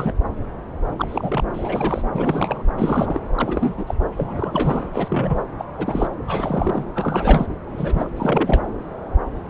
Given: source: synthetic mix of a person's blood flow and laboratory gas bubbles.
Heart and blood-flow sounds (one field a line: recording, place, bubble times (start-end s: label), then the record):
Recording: Doppler ultrasound of blood flow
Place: subclavian vein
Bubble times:
0.00-0.12 s: bubbles
0.97-1.46 s: bubbles
1.54-2.07 s: bubbles
2.11-2.63 s: bubbles
2.77-3.19 s: bubbles
3.36-3.94 s: bubbles
4.17-4.87 s: bubbles
4.92-5.45 s: bubbles
5.58-5.65 s: bubbles
5.72-6.07 s: bubbles
6.27-6.85 s: bubbles
6.94-7.46 s: bubbles
7.63-8.10 s: bubbles
8.17-8.62 s: bubbles
From the record:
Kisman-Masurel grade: 332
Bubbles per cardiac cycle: rolling drumbeat, 9 or more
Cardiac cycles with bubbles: 50 to 99%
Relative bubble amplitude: moderate (0.250 to 0.450)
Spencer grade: 3 (all of the cardiac periods contain showers or single bubble signals, but not dominating or overriding the cardiac motion signals)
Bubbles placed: anywhere in the cardiac cycle